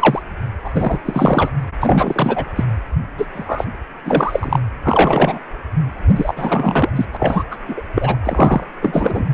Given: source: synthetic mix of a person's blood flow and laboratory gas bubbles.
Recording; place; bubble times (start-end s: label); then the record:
Doppler ultrasound of blood flow; precordium
0.00-0.22 s: bubbles
0.64-0.70 s: bubbles
0.74-0.99 s: bubbles
1.05-1.50 s: bubbles
1.80-2.45 s: bubbles
2.55-2.64 s: bubbles
3.17-3.26 s: bubbles
3.33-3.64 s: bubbles
4.04-4.59 s: bubbles
4.82-5.39 s: bubbles
6.15-6.89 s: bubbles
6.95-7.05 s: bubbles
7.13-7.43 s: bubbles
7.50-7.56 s: bubbles
7.68-7.82 s: bubbles
7.94-8.16 s: bubbles
8.23-8.63 s: bubbles
8.82-9.24 s: bubbles
From the record:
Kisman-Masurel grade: 343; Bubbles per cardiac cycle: rolling drumbeat, 9 or more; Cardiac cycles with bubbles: 100%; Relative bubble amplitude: loud (0.450 to 0.775); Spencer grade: 3 (all of the cardiac periods contain showers or single bubble signals, but not dominating or overriding the cardiac motion signals); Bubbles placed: anywhere in the cardiac cycle